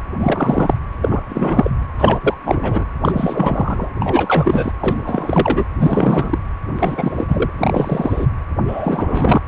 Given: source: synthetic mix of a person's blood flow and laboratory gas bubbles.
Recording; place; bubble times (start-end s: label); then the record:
Doppler ultrasound of blood flow; precordium
0.20-0.77 s: bubbles
1.02-1.21 s: bubbles
1.29-1.70 s: bubbles
1.98-2.34 s: bubbles
2.44-2.84 s: bubbles
3.01-3.89 s: bubbles
3.99-4.71 s: bubbles
4.80-5.64 s: bubbles
5.79-6.38 s: bubbles
6.75-7.50 s: bubbles
7.58-8.27 s: bubbles
8.67-9.41 s: bubbles
From the record:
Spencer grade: 3 (all of the cardiac periods contain showers or single bubble signals, but not dominating or overriding the cardiac motion signals); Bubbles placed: anywhere in the cardiac cycle